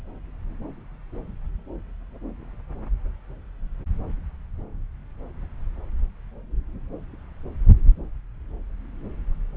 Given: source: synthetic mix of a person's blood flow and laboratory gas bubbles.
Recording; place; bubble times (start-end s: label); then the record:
Doppler ultrasound of blood flow; subclavian vein
no bubbles
From the record:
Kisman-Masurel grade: 000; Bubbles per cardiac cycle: 0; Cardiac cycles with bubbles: 0%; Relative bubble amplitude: no bubbles discernible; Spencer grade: 0 (complete lack of bubble signals)